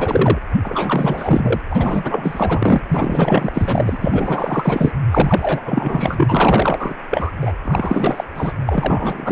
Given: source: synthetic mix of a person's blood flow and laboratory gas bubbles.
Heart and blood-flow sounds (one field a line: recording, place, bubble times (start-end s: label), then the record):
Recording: Doppler ultrasound of blood flow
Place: precordium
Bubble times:
0.00-0.39 s: bubbles
0.62-1.60 s: bubbles
1.70-2.81 s: bubbles
2.88-4.92 s: bubbles
5.11-5.61 s: bubbles
5.66-6.95 s: bubbles
7.10-7.32 s: bubbles
7.41-7.53 s: bubbles
7.64-8.24 s: bubbles
8.35-8.53 s: bubbles
8.66-9.31 s: bubbles
From the record:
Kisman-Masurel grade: 444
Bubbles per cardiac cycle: continuous sound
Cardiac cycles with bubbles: 100%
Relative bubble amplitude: maximal (0.775 to 0.999)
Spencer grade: 4 (maximum detectable bubble signal sounding continuously throughout systole and diastole of every cardiac period, and overriding the amplitude of the normal cardiac signals)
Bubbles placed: anywhere in the cardiac cycle